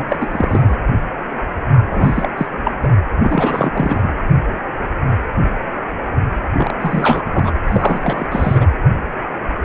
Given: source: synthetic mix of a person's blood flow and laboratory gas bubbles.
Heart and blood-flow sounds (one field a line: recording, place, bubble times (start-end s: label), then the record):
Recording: Doppler ultrasound of blood flow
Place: precordium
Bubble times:
0.00-0.04 s: bubbles
0.08-0.16 s: bubbles
0.20-0.77 s: bubbles
1.90-2.31 s: bubbles
2.38-2.46 s: bubbles
2.65-2.92 s: bubbles
3.23-4.09 s: bubbles
6.57-6.73 s: bubbles
6.80-7.22 s: bubbles
7.26-7.51 s: bubbles
7.67-8.26 s: bubbles
8.31-8.66 s: bubbles
From the record:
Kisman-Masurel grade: 333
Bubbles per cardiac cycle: rolling drumbeat, 9 or more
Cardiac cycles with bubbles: 50 to 99%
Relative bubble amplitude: loud (0.450 to 0.775)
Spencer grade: 3 (all of the cardiac periods contain showers or single bubble signals, but not dominating or overriding the cardiac motion signals)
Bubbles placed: anywhere in the cardiac cycle